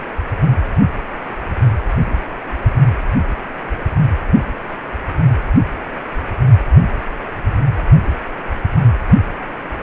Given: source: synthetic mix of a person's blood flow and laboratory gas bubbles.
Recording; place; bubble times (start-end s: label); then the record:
Doppler ultrasound of blood flow; precordium
no bubbles
From the record:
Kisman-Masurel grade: 000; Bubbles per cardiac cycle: 0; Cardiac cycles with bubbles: 0%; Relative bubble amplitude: no bubbles discernible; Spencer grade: 0 (complete lack of bubble signals)